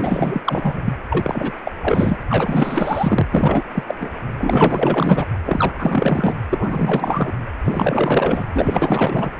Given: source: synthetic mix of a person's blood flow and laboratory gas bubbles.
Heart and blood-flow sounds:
Doppler ultrasound of blood flow; precordium
0.00-0.42 s: bubbles
0.45-0.81 s: bubbles
0.85-0.94 s: bubbles
1.10-1.71 s: bubbles
1.80-2.17 s: bubbles
2.29-3.27 s: bubbles
3.30-3.65 s: bubbles
3.74-3.83 s: bubbles
3.86-3.94 s: bubbles
3.99-4.11 s: bubbles
4.38-5.26 s: bubbles
5.44-5.74 s: bubbles
5.79-6.41 s: bubbles
6.50-7.33 s: bubbles
7.64-8.44 s: bubbles
8.53-9.30 s: bubbles
From the record:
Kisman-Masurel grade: 444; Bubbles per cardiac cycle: continuous sound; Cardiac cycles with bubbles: 100%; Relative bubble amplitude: maximal (0.775 to 0.999); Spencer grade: 4 (maximum detectable bubble signal sounding continuously throughout systole and diastole of every cardiac period, and overriding the amplitude of the normal cardiac signals); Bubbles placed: anywhere in the cardiac cycle

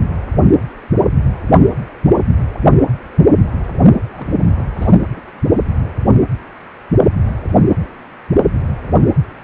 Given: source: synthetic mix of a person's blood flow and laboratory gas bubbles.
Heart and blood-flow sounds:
Doppler ultrasound of blood flow; precordium
4.12-4.63 s: bubbles
4.77-4.97 s: bubbles
5.17-5.21 s: bubbles
From the record:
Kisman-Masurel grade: 211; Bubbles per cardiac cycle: several, 3 to 8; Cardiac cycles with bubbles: 1 to 10%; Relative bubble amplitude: barely perceptible (0.100 to 0.250); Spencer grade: 1 (occasional bubble signal discernible with the cardiac motion signal, with majority of cardiac periods free of bubbles); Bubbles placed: only in the low amplitude regions of the cardiac cycle

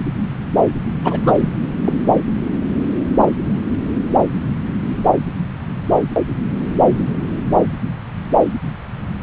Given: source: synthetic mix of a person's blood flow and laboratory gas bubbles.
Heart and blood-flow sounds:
Doppler ultrasound of blood flow; subclavian vein
1.03-1.49 s: bubbles
1.84-1.93 s: bubbles
From the record:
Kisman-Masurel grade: 213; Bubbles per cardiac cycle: several, 3 to 8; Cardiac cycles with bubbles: 1 to 10%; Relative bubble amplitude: loud (0.450 to 0.775); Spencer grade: 1 (occasional bubble signal discernible with the cardiac motion signal, with majority of cardiac periods free of bubbles); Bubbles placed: anywhere in the cardiac cycle

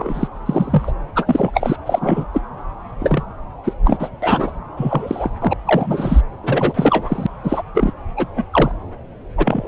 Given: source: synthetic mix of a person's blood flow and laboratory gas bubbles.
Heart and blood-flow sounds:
Doppler ultrasound of blood flow; subclavian vein
0.00-0.28 s: bubbles
0.46-0.92 s: bubbles
1.15-1.51 s: bubbles
1.53-1.76 s: bubbles
1.85-2.25 s: bubbles
2.33-2.41 s: bubbles
3.00-3.23 s: bubbles
3.63-3.73 s: bubbles
3.84-4.10 s: bubbles
4.22-4.52 s: bubbles
4.77-5.30 s: bubbles
5.41-5.54 s: bubbles
5.65-6.21 s: bubbles
6.43-7.27 s: bubbles
7.44-7.62 s: bubbles
7.75-7.93 s: bubbles
8.17-8.26 s: bubbles
8.36-8.45 s: bubbles
8.53-8.71 s: bubbles
9.37-9.68 s: bubbles
From the record:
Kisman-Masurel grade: 233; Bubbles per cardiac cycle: several, 3 to 8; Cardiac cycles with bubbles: 50 to 99%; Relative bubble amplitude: loud (0.450 to 0.775); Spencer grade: 3 (all of the cardiac periods contain showers or single bubble signals, but not dominating or overriding the cardiac motion signals); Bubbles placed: anywhere in the cardiac cycle

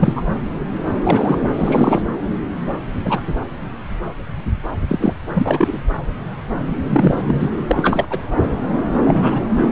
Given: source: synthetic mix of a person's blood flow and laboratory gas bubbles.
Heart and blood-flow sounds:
Doppler ultrasound of blood flow; subclavian vein
0.00-0.23 s: bubbles
1.04-1.39 s: bubbles
1.54-2.02 s: bubbles
2.66-2.75 s: bubbles
3.05-3.21 s: bubbles
4.88-5.15 s: bubbles
5.34-5.80 s: bubbles
6.86-7.22 s: bubbles
7.27-7.50 s: bubbles
7.67-8.06 s: bubbles
8.09-8.22 s: bubbles
9.04-9.46 s: bubbles
From the record:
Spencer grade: 2 (many but less than half of the cardiac periods contain bubble signals, singularly or in groups); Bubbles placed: anywhere in the cardiac cycle

